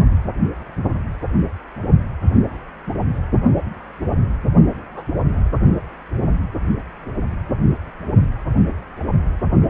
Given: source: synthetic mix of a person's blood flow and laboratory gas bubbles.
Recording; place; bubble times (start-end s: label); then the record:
Doppler ultrasound of blood flow; precordium
4.94-5.05 s: bubbles
From the record:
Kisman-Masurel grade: 111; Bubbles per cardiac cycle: 1 to 2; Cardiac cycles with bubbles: 1 to 10%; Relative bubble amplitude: barely perceptible (0.100 to 0.250); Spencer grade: 1 (occasional bubble signal discernible with the cardiac motion signal, with majority of cardiac periods free of bubbles); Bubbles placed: only in the low amplitude regions of the cardiac cycle